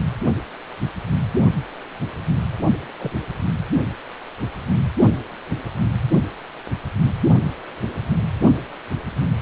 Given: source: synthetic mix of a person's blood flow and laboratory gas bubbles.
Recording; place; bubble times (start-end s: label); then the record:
Doppler ultrasound of blood flow; precordium
2.99-3.11 s: bubbles
From the record:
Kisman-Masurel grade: 121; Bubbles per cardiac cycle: 1 to 2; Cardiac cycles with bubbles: 10 to 50%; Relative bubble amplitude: barely perceptible (0.100 to 0.250); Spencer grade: 2 (many but less than half of the cardiac periods contain bubble signals, singularly or in groups); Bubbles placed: only in the low amplitude regions of the cardiac cycle